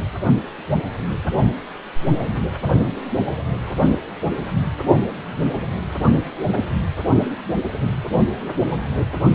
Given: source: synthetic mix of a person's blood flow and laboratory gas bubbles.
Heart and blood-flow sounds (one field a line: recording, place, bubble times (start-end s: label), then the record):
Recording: Doppler ultrasound of blood flow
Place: precordium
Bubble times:
7.07-7.15 s: bubbles
7.55-7.64 s: bubbles
From the record:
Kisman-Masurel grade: 121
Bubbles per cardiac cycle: 1 to 2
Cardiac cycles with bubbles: 10 to 50%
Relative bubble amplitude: barely perceptible (0.100 to 0.250)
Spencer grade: 2 (many but less than half of the cardiac periods contain bubble signals, singularly or in groups)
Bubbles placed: only in the low amplitude regions of the cardiac cycle